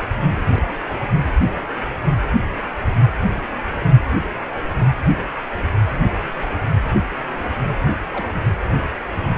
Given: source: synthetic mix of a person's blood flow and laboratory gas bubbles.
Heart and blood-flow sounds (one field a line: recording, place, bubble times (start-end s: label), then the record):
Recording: Doppler ultrasound of blood flow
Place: precordium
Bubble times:
0.32-0.76 s: bubbles
0.85-1.01 s: bubbles
7.88-7.94 s: bubbles
8.13-8.27 s: bubbles
8.35-8.46 s: bubbles
From the record:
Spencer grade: 2 (many but less than half of the cardiac periods contain bubble signals, singularly or in groups)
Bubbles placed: anywhere in the cardiac cycle